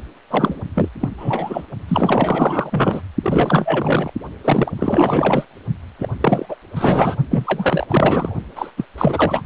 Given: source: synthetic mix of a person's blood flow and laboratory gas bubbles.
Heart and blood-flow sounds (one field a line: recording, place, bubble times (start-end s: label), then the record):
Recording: Doppler ultrasound of blood flow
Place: precordium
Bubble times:
0.30-0.60 s: bubbles
0.74-0.88 s: bubbles
1.00-1.09 s: bubbles
1.17-1.66 s: bubbles
1.88-3.01 s: bubbles
3.23-4.13 s: bubbles
4.44-4.72 s: bubbles
4.79-5.45 s: bubbles
5.99-6.08 s: bubbles
6.21-6.46 s: bubbles
6.49-6.56 s: bubbles
6.75-7.16 s: bubbles
7.30-7.87 s: bubbles
7.89-8.34 s: bubbles
8.55-8.71 s: bubbles
8.76-8.85 s: bubbles
8.97-9.42 s: bubbles
From the record:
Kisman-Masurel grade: 444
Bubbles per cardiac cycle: continuous sound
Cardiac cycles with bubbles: 100%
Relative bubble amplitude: maximal (0.775 to 0.999)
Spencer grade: 4 (maximum detectable bubble signal sounding continuously throughout systole and diastole of every cardiac period, and overriding the amplitude of the normal cardiac signals)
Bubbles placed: only in the low amplitude regions of the cardiac cycle